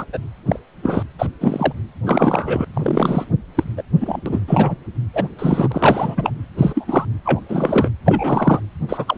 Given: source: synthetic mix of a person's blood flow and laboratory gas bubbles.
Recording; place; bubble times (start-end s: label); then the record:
Doppler ultrasound of blood flow; precordium
0.00-0.05 s: bubbles
0.12-0.19 s: bubbles
0.46-0.59 s: bubbles
0.82-1.03 s: bubbles
1.19-1.26 s: bubbles
1.41-1.73 s: bubbles
2.05-2.65 s: bubbles
2.73-3.25 s: bubbles
3.55-3.63 s: bubbles
3.77-3.83 s: bubbles
4.00-4.21 s: bubbles
4.26-4.40 s: bubbles
4.47-4.76 s: bubbles
5.13-5.28 s: bubbles
5.38-6.30 s: bubbles
6.57-7.05 s: bubbles
7.24-7.40 s: bubbles
7.48-7.89 s: bubbles
8.05-8.61 s: bubbles
8.88-9.17 s: bubbles
From the record:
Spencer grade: 3 (all of the cardiac periods contain showers or single bubble signals, but not dominating or overriding the cardiac motion signals); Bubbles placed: anywhere in the cardiac cycle